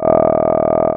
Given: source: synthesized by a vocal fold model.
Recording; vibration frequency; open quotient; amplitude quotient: sustained vowel; 40 Hz; 0.1; 1.3